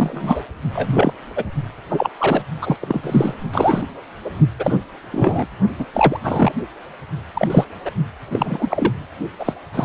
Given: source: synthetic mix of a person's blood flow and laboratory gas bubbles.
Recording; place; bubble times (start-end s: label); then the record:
Doppler ultrasound of blood flow; precordium
0.00-0.45 s: bubbles
0.72-1.13 s: bubbles
1.36-1.44 s: bubbles
1.90-2.10 s: bubbles
2.18-2.44 s: bubbles
2.61-2.77 s: bubbles
2.81-3.35 s: bubbles
3.53-3.87 s: bubbles
4.25-4.31 s: bubbles
4.59-4.79 s: bubbles
5.12-5.45 s: bubbles
5.78-5.86 s: bubbles
5.94-6.20 s: bubbles
6.23-6.52 s: bubbles
7.33-7.48 s: bubbles
7.50-7.65 s: bubbles
7.85-7.91 s: bubbles
8.30-8.93 s: bubbles
9.39-9.54 s: bubbles
9.74-9.85 s: bubbles
From the record:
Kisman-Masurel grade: 243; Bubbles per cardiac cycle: several, 3 to 8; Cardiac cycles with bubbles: 100%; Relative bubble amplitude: loud (0.450 to 0.775); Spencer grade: 3 (all of the cardiac periods contain showers or single bubble signals, but not dominating or overriding the cardiac motion signals); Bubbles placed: only in the low amplitude regions of the cardiac cycle